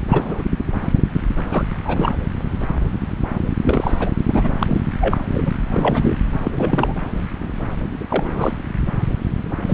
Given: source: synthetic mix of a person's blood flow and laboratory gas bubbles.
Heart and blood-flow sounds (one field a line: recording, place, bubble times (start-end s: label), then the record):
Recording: Doppler ultrasound of blood flow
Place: subclavian vein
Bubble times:
0.10-0.43 s: bubbles
1.50-1.64 s: bubbles
1.84-2.12 s: bubbles
3.61-3.96 s: bubbles
4.00-4.09 s: bubbles
4.26-4.50 s: bubbles
4.59-4.81 s: bubbles
5.01-5.17 s: bubbles
5.33-5.52 s: bubbles
5.72-6.16 s: bubbles
6.45-6.95 s: bubbles
8.01-8.05 s: bubbles
8.08-8.56 s: bubbles
9.67-9.74 s: bubbles
From the record:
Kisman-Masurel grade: 232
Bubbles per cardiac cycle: several, 3 to 8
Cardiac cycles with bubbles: 50 to 99%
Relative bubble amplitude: moderate (0.250 to 0.450)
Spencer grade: 3 (all of the cardiac periods contain showers or single bubble signals, but not dominating or overriding the cardiac motion signals)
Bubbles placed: anywhere in the cardiac cycle